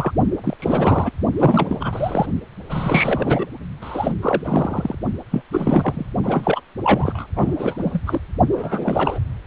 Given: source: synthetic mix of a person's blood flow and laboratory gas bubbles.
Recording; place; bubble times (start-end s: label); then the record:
Doppler ultrasound of blood flow; precordium
0.00-0.11 s: bubbles
0.43-0.56 s: bubbles
0.59-1.10 s: bubbles
1.36-2.26 s: bubbles
2.70-3.46 s: bubbles
3.81-4.14 s: bubbles
4.22-4.42 s: bubbles
4.44-4.95 s: bubbles
5.31-5.42 s: bubbles
5.52-6.06 s: bubbles
6.23-6.60 s: bubbles
6.84-7.27 s: bubbles
7.36-8.00 s: bubbles
8.06-8.20 s: bubbles
8.52-9.20 s: bubbles
From the record:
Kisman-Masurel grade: 342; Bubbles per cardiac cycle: rolling drumbeat, 9 or more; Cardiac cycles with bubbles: 100%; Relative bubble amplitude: moderate (0.250 to 0.450); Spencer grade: 3 (all of the cardiac periods contain showers or single bubble signals, but not dominating or overriding the cardiac motion signals); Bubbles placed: only in the low amplitude regions of the cardiac cycle